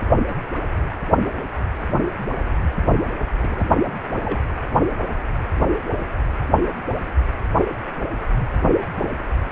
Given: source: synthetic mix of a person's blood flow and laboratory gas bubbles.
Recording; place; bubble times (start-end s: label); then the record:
Doppler ultrasound of blood flow; precordium
3.42-3.68 s: bubbles
4.25-4.39 s: bubbles
From the record:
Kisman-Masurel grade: 221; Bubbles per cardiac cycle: several, 3 to 8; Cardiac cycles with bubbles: 10 to 50%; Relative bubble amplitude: barely perceptible (0.100 to 0.250); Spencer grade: 2 (many but less than half of the cardiac periods contain bubble signals, singularly or in groups); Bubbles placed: anywhere in the cardiac cycle